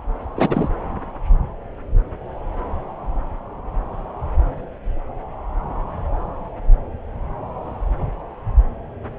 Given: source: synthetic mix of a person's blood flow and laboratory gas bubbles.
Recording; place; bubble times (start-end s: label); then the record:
Doppler ultrasound of blood flow; subclavian vein
0.35-0.68 s: bubbles
From the record:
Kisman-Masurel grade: 212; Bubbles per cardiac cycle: several, 3 to 8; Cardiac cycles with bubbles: 1 to 10%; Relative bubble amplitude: moderate (0.250 to 0.450); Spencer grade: 1 (occasional bubble signal discernible with the cardiac motion signal, with majority of cardiac periods free of bubbles); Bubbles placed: anywhere in the cardiac cycle